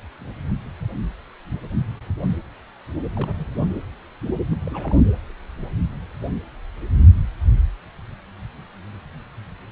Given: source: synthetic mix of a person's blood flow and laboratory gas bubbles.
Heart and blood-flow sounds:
Doppler ultrasound of blood flow; precordium
3.16-3.45 s: bubbles
3.58-3.67 s: bubbles
4.51-4.55 s: bubbles
4.65-5.02 s: bubbles
From the record:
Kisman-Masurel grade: 221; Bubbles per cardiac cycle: several, 3 to 8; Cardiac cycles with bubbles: 10 to 50%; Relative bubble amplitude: barely perceptible (0.100 to 0.250); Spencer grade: 2 (many but less than half of the cardiac periods contain bubble signals, singularly or in groups); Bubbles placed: anywhere in the cardiac cycle

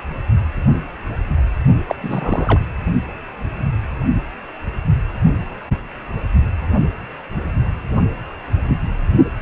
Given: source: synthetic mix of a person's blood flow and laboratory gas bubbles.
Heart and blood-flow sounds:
Doppler ultrasound of blood flow; precordium
1.88-1.95 s: bubbles
2.02-2.61 s: bubbles
From the record:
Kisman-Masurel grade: 212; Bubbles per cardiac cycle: several, 3 to 8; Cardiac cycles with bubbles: 1 to 10%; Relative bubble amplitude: moderate (0.250 to 0.450); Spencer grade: 1 (occasional bubble signal discernible with the cardiac motion signal, with majority of cardiac periods free of bubbles); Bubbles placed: only in the low amplitude regions of the cardiac cycle

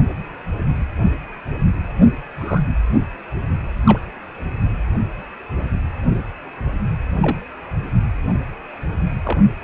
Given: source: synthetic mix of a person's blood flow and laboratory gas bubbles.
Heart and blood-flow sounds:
Doppler ultrasound of blood flow; precordium
2.38-2.62 s: bubbles
3.84-3.98 s: bubbles
6.10-6.17 s: bubbles
7.22-7.37 s: bubbles
9.24-9.38 s: bubbles
From the record:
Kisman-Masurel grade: 122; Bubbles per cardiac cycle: 1 to 2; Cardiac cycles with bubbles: 10 to 50%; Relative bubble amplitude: moderate (0.250 to 0.450); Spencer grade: 2 (many but less than half of the cardiac periods contain bubble signals, singularly or in groups); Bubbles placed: anywhere in the cardiac cycle

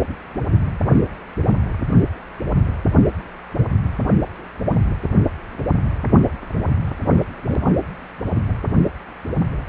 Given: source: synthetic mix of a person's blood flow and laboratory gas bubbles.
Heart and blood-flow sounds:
Doppler ultrasound of blood flow; precordium
no bubbles
From the record:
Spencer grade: 0 (complete lack of bubble signals)

